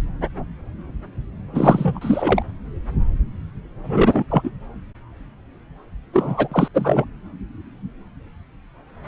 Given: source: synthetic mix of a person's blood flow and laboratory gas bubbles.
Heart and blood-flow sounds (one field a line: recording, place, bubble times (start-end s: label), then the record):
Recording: Doppler ultrasound of blood flow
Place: subclavian vein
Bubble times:
1.53-2.42 s: bubbles
3.83-4.25 s: bubbles
4.29-4.51 s: bubbles
6.12-6.48 s: bubbles
6.51-6.68 s: bubbles
6.73-7.05 s: bubbles
From the record:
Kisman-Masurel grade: 333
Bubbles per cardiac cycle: rolling drumbeat, 9 or more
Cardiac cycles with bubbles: 50 to 99%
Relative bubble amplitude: loud (0.450 to 0.775)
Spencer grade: 3 (all of the cardiac periods contain showers or single bubble signals, but not dominating or overriding the cardiac motion signals)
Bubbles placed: anywhere in the cardiac cycle